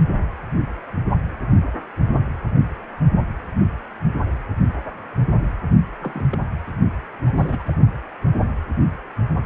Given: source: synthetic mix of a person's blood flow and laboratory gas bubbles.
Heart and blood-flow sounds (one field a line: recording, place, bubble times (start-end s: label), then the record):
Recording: Doppler ultrasound of blood flow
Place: precordium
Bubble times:
6.01-6.25 s: bubbles
6.32-6.38 s: bubbles
7.26-7.62 s: bubbles
7.66-7.75 s: bubbles
From the record:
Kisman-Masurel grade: 221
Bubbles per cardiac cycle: several, 3 to 8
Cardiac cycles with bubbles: 10 to 50%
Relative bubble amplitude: barely perceptible (0.100 to 0.250)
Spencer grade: 2 (many but less than half of the cardiac periods contain bubble signals, singularly or in groups)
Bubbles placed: only in the low amplitude regions of the cardiac cycle